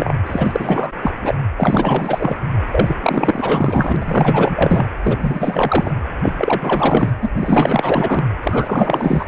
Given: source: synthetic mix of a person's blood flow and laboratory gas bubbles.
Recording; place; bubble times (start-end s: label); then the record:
Doppler ultrasound of blood flow; precordium
0.00-0.14 s: bubbles
0.26-0.93 s: bubbles
1.02-1.11 s: bubbles
1.22-1.35 s: bubbles
1.57-2.37 s: bubbles
2.71-2.95 s: bubbles
3.02-4.86 s: bubbles
5.03-5.95 s: bubbles
6.23-6.33 s: bubbles
6.38-7.16 s: bubbles
7.22-7.31 s: bubbles
7.37-8.25 s: bubbles
8.43-9.26 s: bubbles
From the record:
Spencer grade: 4 (maximum detectable bubble signal sounding continuously throughout systole and diastole of every cardiac period, and overriding the amplitude of the normal cardiac signals); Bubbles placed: anywhere in the cardiac cycle